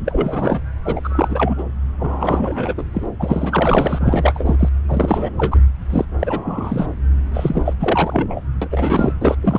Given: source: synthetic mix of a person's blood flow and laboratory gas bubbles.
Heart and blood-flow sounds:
Doppler ultrasound of blood flow; subclavian vein
0.05-0.61 s: bubbles
0.85-1.01 s: bubbles
1.03-1.55 s: bubbles
1.57-1.64 s: bubbles
1.98-2.75 s: bubbles
2.77-2.84 s: bubbles
2.94-3.05 s: bubbles
3.19-4.55 s: bubbles
4.59-4.68 s: bubbles
4.88-5.33 s: bubbles
5.38-5.59 s: bubbles
5.89-6.05 s: bubbles
6.19-6.87 s: bubbles
7.33-7.62 s: bubbles
7.65-7.74 s: bubbles
7.80-8.41 s: bubbles
8.62-8.68 s: bubbles
8.71-9.12 s: bubbles
9.21-9.36 s: bubbles
9.42-9.59 s: bubbles
From the record:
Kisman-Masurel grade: 343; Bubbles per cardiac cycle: rolling drumbeat, 9 or more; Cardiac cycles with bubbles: 100%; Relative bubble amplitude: loud (0.450 to 0.775); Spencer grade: 3 (all of the cardiac periods contain showers or single bubble signals, but not dominating or overriding the cardiac motion signals); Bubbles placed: anywhere in the cardiac cycle

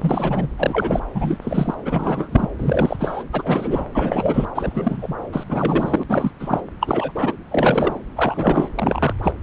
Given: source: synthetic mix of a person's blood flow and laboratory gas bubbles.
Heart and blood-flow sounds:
Doppler ultrasound of blood flow; subclavian vein
0.00-0.48 s: bubbles
0.58-1.00 s: bubbles
1.15-1.37 s: bubbles
1.41-1.74 s: bubbles
1.85-2.51 s: bubbles
2.58-2.97 s: bubbles
2.99-3.24 s: bubbles
3.33-3.86 s: bubbles
3.95-4.48 s: bubbles
4.54-5.13 s: bubbles
5.32-6.04 s: bubbles
6.09-6.31 s: bubbles
6.40-6.61 s: bubbles
6.80-7.12 s: bubbles
7.15-7.33 s: bubbles
7.50-7.99 s: bubbles
8.15-8.69 s: bubbles
8.75-9.13 s: bubbles
9.23-9.34 s: bubbles
From the record:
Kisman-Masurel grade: 342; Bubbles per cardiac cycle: rolling drumbeat, 9 or more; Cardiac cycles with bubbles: 100%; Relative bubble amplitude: moderate (0.250 to 0.450); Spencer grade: 3 (all of the cardiac periods contain showers or single bubble signals, but not dominating or overriding the cardiac motion signals); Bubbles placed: anywhere in the cardiac cycle

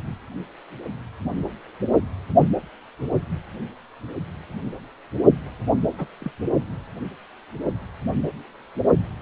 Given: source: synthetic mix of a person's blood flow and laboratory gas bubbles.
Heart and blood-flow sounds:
Doppler ultrasound of blood flow; precordium
5.98-6.05 s: bubbles
6.19-6.31 s: bubbles
From the record:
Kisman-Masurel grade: 111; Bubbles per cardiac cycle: 1 to 2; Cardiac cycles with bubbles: 1 to 10%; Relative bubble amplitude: barely perceptible (0.100 to 0.250); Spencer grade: 1 (occasional bubble signal discernible with the cardiac motion signal, with majority of cardiac periods free of bubbles); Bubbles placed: only in the low amplitude regions of the cardiac cycle

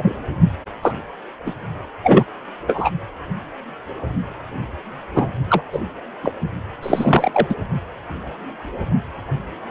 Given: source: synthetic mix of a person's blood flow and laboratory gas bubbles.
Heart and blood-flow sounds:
Doppler ultrasound of blood flow; precordium
0.00-0.14 s: bubbles
0.82-0.94 s: bubbles
1.46-1.54 s: bubbles
2.03-2.24 s: bubbles
2.66-2.90 s: bubbles
5.15-5.27 s: bubbles
5.50-5.62 s: bubbles
5.73-5.79 s: bubbles
6.23-6.32 s: bubbles
6.83-7.55 s: bubbles
From the record:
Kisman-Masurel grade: 233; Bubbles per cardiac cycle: several, 3 to 8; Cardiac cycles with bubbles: 50 to 99%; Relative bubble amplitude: loud (0.450 to 0.775); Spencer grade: 3 (all of the cardiac periods contain showers or single bubble signals, but not dominating or overriding the cardiac motion signals); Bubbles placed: only in the low amplitude regions of the cardiac cycle

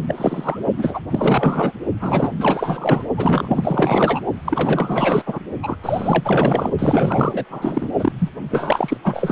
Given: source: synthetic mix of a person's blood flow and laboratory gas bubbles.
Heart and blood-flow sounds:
Doppler ultrasound of blood flow; precordium
0.08-0.61 s: bubbles
0.77-1.00 s: bubbles
1.10-1.74 s: bubbles
2.00-2.31 s: bubbles
2.38-3.06 s: bubbles
3.17-4.21 s: bubbles
4.45-5.23 s: bubbles
5.25-5.39 s: bubbles
5.62-5.76 s: bubbles
5.83-6.71 s: bubbles
6.79-7.45 s: bubbles
7.50-7.93 s: bubbles
7.99-8.12 s: bubbles
8.18-8.29 s: bubbles
8.50-8.97 s: bubbles
9.04-9.32 s: bubbles
From the record:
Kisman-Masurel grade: 444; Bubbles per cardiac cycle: continuous sound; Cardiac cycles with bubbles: 100%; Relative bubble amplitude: maximal (0.775 to 0.999); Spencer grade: 4 (maximum detectable bubble signal sounding continuously throughout systole and diastole of every cardiac period, and overriding the amplitude of the normal cardiac signals); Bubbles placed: only in the low amplitude regions of the cardiac cycle

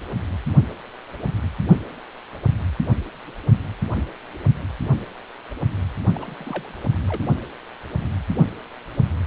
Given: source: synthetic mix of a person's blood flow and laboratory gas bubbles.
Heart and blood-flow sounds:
Doppler ultrasound of blood flow; precordium
6.14-6.75 s: bubbles
7.08-7.21 s: bubbles
From the record:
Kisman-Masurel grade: 211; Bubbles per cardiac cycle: several, 3 to 8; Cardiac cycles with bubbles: 1 to 10%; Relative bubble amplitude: barely perceptible (0.100 to 0.250); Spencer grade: 1 (occasional bubble signal discernible with the cardiac motion signal, with majority of cardiac periods free of bubbles); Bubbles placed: only in the low amplitude regions of the cardiac cycle

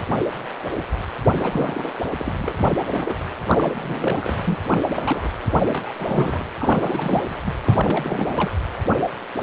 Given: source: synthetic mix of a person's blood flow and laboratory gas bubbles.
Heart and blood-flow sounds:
Doppler ultrasound of blood flow; precordium
1.23-1.32 s: bubbles
1.35-1.94 s: bubbles
2.14-2.31 s: bubbles
2.39-2.56 s: bubbles
2.63-2.75 s: bubbles
2.88-3.17 s: bubbles
3.46-4.34 s: bubbles
4.46-4.60 s: bubbles
4.68-5.29 s: bubbles
5.45-5.92 s: bubbles
5.99-6.45 s: bubbles
6.59-7.38 s: bubbles
7.46-7.54 s: bubbles
7.65-8.50 s: bubbles
From the record:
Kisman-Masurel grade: 332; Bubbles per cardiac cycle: rolling drumbeat, 9 or more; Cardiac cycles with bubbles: 50 to 99%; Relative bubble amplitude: moderate (0.250 to 0.450); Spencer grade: 3 (all of the cardiac periods contain showers or single bubble signals, but not dominating or overriding the cardiac motion signals); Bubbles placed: anywhere in the cardiac cycle

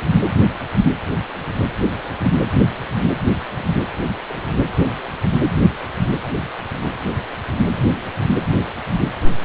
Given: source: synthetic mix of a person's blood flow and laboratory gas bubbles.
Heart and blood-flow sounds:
Doppler ultrasound of blood flow; precordium
3.56-3.66 s: bubbles
4.28-4.54 s: bubbles
9.38-9.45 s: bubbles
From the record:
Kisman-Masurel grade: 121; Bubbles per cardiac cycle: 1 to 2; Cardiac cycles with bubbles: 10 to 50%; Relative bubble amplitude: barely perceptible (0.100 to 0.250); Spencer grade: 2 (many but less than half of the cardiac periods contain bubble signals, singularly or in groups); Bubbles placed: anywhere in the cardiac cycle

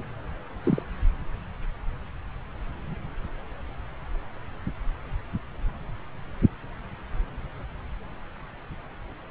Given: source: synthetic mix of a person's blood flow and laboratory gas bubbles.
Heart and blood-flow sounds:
Doppler ultrasound of blood flow; subclavian vein
0.00-0.05 s: bubbles
0.63-0.83 s: bubbles
From the record:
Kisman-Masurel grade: 111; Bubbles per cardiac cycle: 1 to 2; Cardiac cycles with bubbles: 1 to 10%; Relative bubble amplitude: barely perceptible (0.100 to 0.250); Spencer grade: 1 (occasional bubble signal discernible with the cardiac motion signal, with majority of cardiac periods free of bubbles); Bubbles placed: anywhere in the cardiac cycle

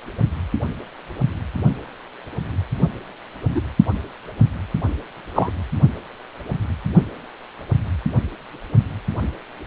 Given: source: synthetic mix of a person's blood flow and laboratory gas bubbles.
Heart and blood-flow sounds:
Doppler ultrasound of blood flow; precordium
3.54-3.62 s: bubbles
5.36-5.50 s: bubbles
From the record:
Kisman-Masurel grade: 123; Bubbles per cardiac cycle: 1 to 2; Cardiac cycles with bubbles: 10 to 50%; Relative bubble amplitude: loud (0.450 to 0.775); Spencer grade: 2 (many but less than half of the cardiac periods contain bubble signals, singularly or in groups); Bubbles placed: only in the low amplitude regions of the cardiac cycle

